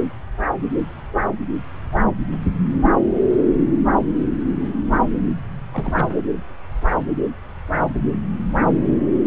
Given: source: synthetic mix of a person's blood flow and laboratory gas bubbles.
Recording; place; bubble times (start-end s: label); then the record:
Doppler ultrasound of blood flow; subclavian vein
5.71-6.22 s: bubbles
From the record:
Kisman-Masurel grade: 111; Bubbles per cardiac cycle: 1 to 2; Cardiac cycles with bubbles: 1 to 10%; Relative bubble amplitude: barely perceptible (0.100 to 0.250); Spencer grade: 1 (occasional bubble signal discernible with the cardiac motion signal, with majority of cardiac periods free of bubbles); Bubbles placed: anywhere in the cardiac cycle